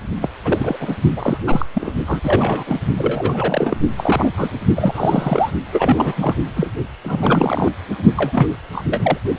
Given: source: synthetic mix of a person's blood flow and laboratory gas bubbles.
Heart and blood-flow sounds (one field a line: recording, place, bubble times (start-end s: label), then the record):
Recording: Doppler ultrasound of blood flow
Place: precordium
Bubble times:
0.21-0.29 s: bubbles
0.44-0.95 s: bubbles
1.16-1.38 s: bubbles
1.46-1.66 s: bubbles
1.73-1.93 s: bubbles
2.06-2.64 s: bubbles
2.66-2.80 s: bubbles
2.97-3.77 s: bubbles
3.97-4.31 s: bubbles
4.37-4.49 s: bubbles
4.75-5.50 s: bubbles
5.71-6.35 s: bubbles
6.55-6.71 s: bubbles
7.04-7.72 s: bubbles
8.17-8.47 s: bubbles
8.72-8.85 s: bubbles
8.91-9.18 s: bubbles
9.36-9.39 s: bubbles
From the record:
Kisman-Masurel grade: 342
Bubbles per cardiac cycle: rolling drumbeat, 9 or more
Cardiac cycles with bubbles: 100%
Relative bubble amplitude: moderate (0.250 to 0.450)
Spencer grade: 3 (all of the cardiac periods contain showers or single bubble signals, but not dominating or overriding the cardiac motion signals)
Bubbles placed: only in the low amplitude regions of the cardiac cycle